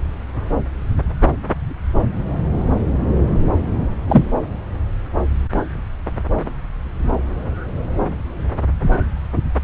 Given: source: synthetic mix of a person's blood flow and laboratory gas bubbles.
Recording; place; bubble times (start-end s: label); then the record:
Doppler ultrasound of blood flow; subclavian vein
4.08-4.23 s: bubbles
From the record:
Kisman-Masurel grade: 123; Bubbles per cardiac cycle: 1 to 2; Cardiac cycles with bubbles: 10 to 50%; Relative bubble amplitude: loud (0.450 to 0.775); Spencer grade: 2 (many but less than half of the cardiac periods contain bubble signals, singularly or in groups); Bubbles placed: anywhere in the cardiac cycle